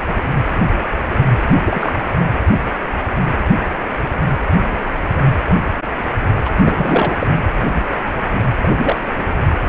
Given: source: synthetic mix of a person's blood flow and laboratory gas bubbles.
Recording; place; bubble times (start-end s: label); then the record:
Doppler ultrasound of blood flow; precordium
1.64-1.92 s: bubbles
6.45-6.50 s: bubbles
6.62-7.17 s: bubbles
7.20-7.27 s: bubbles
8.63-8.68 s: bubbles
8.80-9.13 s: bubbles
From the record:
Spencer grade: 2 (many but less than half of the cardiac periods contain bubble signals, singularly or in groups); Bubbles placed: anywhere in the cardiac cycle